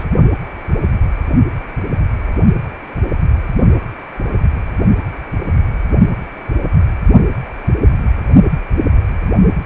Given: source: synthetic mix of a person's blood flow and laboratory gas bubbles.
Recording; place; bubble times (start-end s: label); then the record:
Doppler ultrasound of blood flow; precordium
0.00-0.04 s: bubbles
From the record:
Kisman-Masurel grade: 213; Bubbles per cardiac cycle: several, 3 to 8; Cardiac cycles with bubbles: 1 to 10%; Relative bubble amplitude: loud (0.450 to 0.775); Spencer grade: 1 (occasional bubble signal discernible with the cardiac motion signal, with majority of cardiac periods free of bubbles); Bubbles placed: only in the low amplitude regions of the cardiac cycle